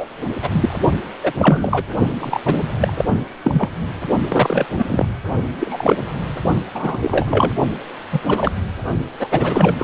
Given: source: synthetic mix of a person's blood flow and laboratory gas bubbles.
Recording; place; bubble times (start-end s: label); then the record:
Doppler ultrasound of blood flow; precordium
0.00-0.06 s: bubbles
0.42-0.77 s: bubbles
1.23-1.33 s: bubbles
1.38-1.84 s: bubbles
2.21-2.39 s: bubbles
2.45-2.62 s: bubbles
2.80-2.93 s: bubbles
2.98-3.05 s: bubbles
3.43-3.71 s: bubbles
4.28-4.66 s: bubbles
4.78-4.84 s: bubbles
4.88-5.06 s: bubbles
5.58-5.96 s: bubbles
6.74-6.98 s: bubbles
7.01-7.53 s: bubbles
8.12-8.20 s: bubbles
8.26-8.51 s: bubbles
9.19-9.29 s: bubbles
9.31-9.84 s: bubbles
From the record:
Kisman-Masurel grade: 243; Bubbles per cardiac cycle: several, 3 to 8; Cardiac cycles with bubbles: 100%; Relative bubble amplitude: loud (0.450 to 0.775); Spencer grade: 3 (all of the cardiac periods contain showers or single bubble signals, but not dominating or overriding the cardiac motion signals); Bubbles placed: only in the low amplitude regions of the cardiac cycle